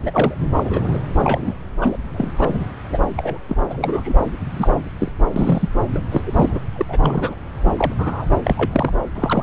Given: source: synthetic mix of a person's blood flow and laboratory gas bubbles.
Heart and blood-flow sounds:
Doppler ultrasound of blood flow; subclavian vein
0.00-0.34 s: bubbles
0.53-0.98 s: bubbles
1.18-1.58 s: bubbles
1.81-1.98 s: bubbles
2.14-2.65 s: bubbles
2.90-2.98 s: bubbles
3.17-3.38 s: bubbles
3.48-3.56 s: bubbles
3.69-4.14 s: bubbles
4.51-4.71 s: bubbles
4.99-5.12 s: bubbles
5.36-5.68 s: bubbles
5.92-6.02 s: bubbles
6.11-6.22 s: bubbles
6.26-6.60 s: bubbles
6.75-6.85 s: bubbles
6.88-7.35 s: bubbles
7.66-7.72 s: bubbles
7.77-7.94 s: bubbles
7.99-8.26 s: bubbles
8.44-8.93 s: bubbles
9.15-9.43 s: bubbles
From the record:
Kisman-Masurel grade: 242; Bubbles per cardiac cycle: several, 3 to 8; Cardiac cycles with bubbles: 100%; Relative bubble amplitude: moderate (0.250 to 0.450); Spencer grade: 3 (all of the cardiac periods contain showers or single bubble signals, but not dominating or overriding the cardiac motion signals); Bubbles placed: anywhere in the cardiac cycle

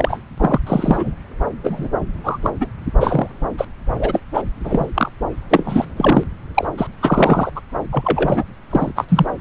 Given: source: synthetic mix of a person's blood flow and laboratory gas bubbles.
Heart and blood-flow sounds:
Doppler ultrasound of blood flow; subclavian vein
0.00-0.19 s: bubbles
0.38-0.59 s: bubbles
0.66-1.15 s: bubbles
1.63-1.88 s: bubbles
2.23-2.38 s: bubbles
2.42-2.50 s: bubbles
2.60-2.67 s: bubbles
3.00-3.48 s: bubbles
3.57-3.67 s: bubbles
3.99-4.20 s: bubbles
4.33-4.42 s: bubbles
4.64-4.86 s: bubbles
4.94-5.09 s: bubbles
5.49-5.93 s: bubbles
5.96-6.24 s: bubbles
6.54-6.67 s: bubbles
6.77-6.87 s: bubbles
7.01-7.50 s: bubbles
7.55-7.61 s: bubbles
7.92-8.43 s: bubbles
8.70-8.92 s: bubbles
8.96-9.06 s: bubbles
9.09-9.26 s: bubbles
From the record:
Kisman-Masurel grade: 243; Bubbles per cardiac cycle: several, 3 to 8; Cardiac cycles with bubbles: 100%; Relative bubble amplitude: loud (0.450 to 0.775); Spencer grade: 3 (all of the cardiac periods contain showers or single bubble signals, but not dominating or overriding the cardiac motion signals); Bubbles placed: anywhere in the cardiac cycle

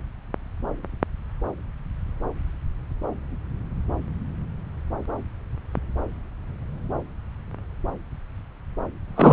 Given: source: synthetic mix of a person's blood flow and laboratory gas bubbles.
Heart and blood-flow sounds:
Doppler ultrasound of blood flow; subclavian vein
9.15-9.33 s: bubbles
From the record:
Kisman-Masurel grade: 213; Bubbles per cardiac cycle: several, 3 to 8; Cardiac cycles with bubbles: 1 to 10%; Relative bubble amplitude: loud (0.450 to 0.775); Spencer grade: 1 (occasional bubble signal discernible with the cardiac motion signal, with majority of cardiac periods free of bubbles); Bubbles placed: anywhere in the cardiac cycle

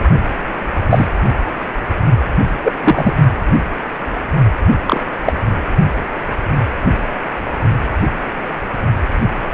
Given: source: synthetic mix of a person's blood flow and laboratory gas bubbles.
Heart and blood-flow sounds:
Doppler ultrasound of blood flow; precordium
0.89-1.09 s: bubbles
2.63-2.73 s: bubbles
2.83-3.16 s: bubbles
4.86-5.03 s: bubbles
5.25-5.32 s: bubbles
From the record:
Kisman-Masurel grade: 123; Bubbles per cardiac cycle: 1 to 2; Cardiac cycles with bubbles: 10 to 50%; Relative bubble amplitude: loud (0.450 to 0.775); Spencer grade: 2 (many but less than half of the cardiac periods contain bubble signals, singularly or in groups); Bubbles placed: only in the low amplitude regions of the cardiac cycle

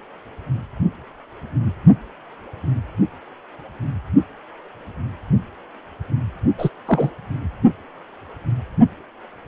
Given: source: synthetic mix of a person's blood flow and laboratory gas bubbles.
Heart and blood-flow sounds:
Doppler ultrasound of blood flow; precordium
6.57-6.69 s: bubbles
6.86-7.10 s: bubbles
From the record:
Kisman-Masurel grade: 123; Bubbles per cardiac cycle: 1 to 2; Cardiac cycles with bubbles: 10 to 50%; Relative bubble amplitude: loud (0.450 to 0.775); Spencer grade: 2 (many but less than half of the cardiac periods contain bubble signals, singularly or in groups); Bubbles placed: only in the low amplitude regions of the cardiac cycle

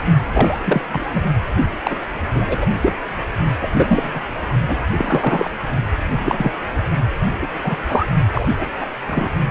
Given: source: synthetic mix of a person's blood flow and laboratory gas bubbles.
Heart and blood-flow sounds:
Doppler ultrasound of blood flow; precordium
0.33-0.60 s: bubbles
0.64-0.82 s: bubbles
0.91-1.24 s: bubbles
1.83-1.96 s: bubbles
2.35-2.65 s: bubbles
2.81-2.92 s: bubbles
3.60-3.68 s: bubbles
3.73-4.22 s: bubbles
4.67-4.76 s: bubbles
4.97-5.50 s: bubbles
6.18-6.51 s: bubbles
7.42-7.47 s: bubbles
7.63-7.75 s: bubbles
7.87-8.06 s: bubbles
8.33-8.48 s: bubbles
8.56-8.69 s: bubbles
8.80-8.89 s: bubbles
9.07-9.29 s: bubbles
From the record:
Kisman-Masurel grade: 233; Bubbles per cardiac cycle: several, 3 to 8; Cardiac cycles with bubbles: 50 to 99%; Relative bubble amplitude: loud (0.450 to 0.775); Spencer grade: 3 (all of the cardiac periods contain showers or single bubble signals, but not dominating or overriding the cardiac motion signals); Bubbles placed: only in the low amplitude regions of the cardiac cycle

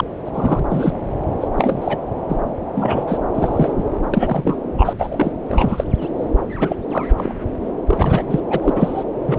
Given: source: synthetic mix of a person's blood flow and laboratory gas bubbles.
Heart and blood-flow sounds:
Doppler ultrasound of blood flow; subclavian vein
0.00-0.04 s: bubbles
0.25-0.30 s: bubbles
0.34-0.59 s: bubbles
0.69-0.93 s: bubbles
1.40-1.48 s: bubbles
1.56-1.98 s: bubbles
2.28-2.36 s: bubbles
2.75-3.04 s: bubbles
3.07-3.21 s: bubbles
3.34-3.83 s: bubbles
4.13-4.56 s: bubbles
4.77-4.93 s: bubbles
4.99-5.32 s: bubbles
5.48-5.84 s: bubbles
6.00-6.08 s: bubbles
6.58-6.76 s: bubbles
6.90-7.05 s: bubbles
7.17-7.35 s: bubbles
7.65-7.71 s: bubbles
7.87-8.41 s: bubbles
8.50-9.04 s: bubbles
9.27-9.39 s: bubbles
From the record:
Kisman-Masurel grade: 243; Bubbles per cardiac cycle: several, 3 to 8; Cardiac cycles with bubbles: 100%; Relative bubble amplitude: loud (0.450 to 0.775); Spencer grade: 3 (all of the cardiac periods contain showers or single bubble signals, but not dominating or overriding the cardiac motion signals); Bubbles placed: anywhere in the cardiac cycle

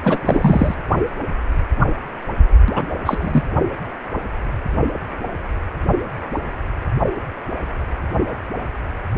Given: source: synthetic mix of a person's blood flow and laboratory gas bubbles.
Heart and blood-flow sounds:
Doppler ultrasound of blood flow; precordium
0.04-0.22 s: bubbles
0.25-0.75 s: bubbles
2.75-2.85 s: bubbles
3.06-3.42 s: bubbles
From the record:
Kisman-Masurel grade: 223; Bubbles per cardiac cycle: several, 3 to 8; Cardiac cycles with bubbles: 10 to 50%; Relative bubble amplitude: loud (0.450 to 0.775); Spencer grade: 2 (many but less than half of the cardiac periods contain bubble signals, singularly or in groups); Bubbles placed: only in the low amplitude regions of the cardiac cycle

